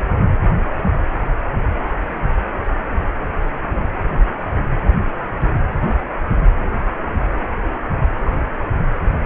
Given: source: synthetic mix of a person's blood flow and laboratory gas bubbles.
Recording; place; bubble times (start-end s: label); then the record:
Doppler ultrasound of blood flow; precordium
no bubbles
From the record:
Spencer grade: 0 (complete lack of bubble signals)